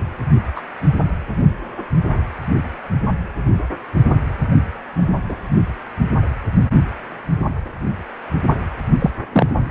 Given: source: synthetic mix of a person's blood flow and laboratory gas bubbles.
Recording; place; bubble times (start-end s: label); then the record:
Doppler ultrasound of blood flow; precordium
0.55-0.61 s: bubbles
5.29-5.36 s: bubbles
8.99-9.11 s: bubbles
9.32-9.46 s: bubbles
From the record:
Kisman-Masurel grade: 123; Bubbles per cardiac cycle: 1 to 2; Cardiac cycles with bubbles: 10 to 50%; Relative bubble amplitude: loud (0.450 to 0.775); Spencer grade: 2 (many but less than half of the cardiac periods contain bubble signals, singularly or in groups); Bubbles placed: only in the low amplitude regions of the cardiac cycle